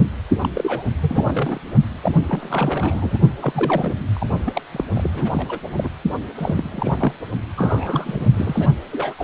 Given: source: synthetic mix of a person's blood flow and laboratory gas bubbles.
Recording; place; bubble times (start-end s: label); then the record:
Doppler ultrasound of blood flow; precordium
0.42-0.49 s: bubbles
0.54-0.83 s: bubbles
1.01-1.58 s: bubbles
2.02-2.17 s: bubbles
2.27-3.18 s: bubbles
3.41-3.94 s: bubbles
4.13-4.27 s: bubbles
4.46-4.62 s: bubbles
4.71-4.85 s: bubbles
4.95-5.11 s: bubbles
5.13-5.59 s: bubbles
5.77-5.89 s: bubbles
6.35-7.12 s: bubbles
7.56-8.27 s: bubbles
8.34-8.70 s: bubbles
8.92-9.14 s: bubbles
9.18-9.24 s: bubbles
From the record:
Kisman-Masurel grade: 332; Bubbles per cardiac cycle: rolling drumbeat, 9 or more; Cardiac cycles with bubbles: 50 to 99%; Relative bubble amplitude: moderate (0.250 to 0.450); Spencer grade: 3 (all of the cardiac periods contain showers or single bubble signals, but not dominating or overriding the cardiac motion signals); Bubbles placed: only in the low amplitude regions of the cardiac cycle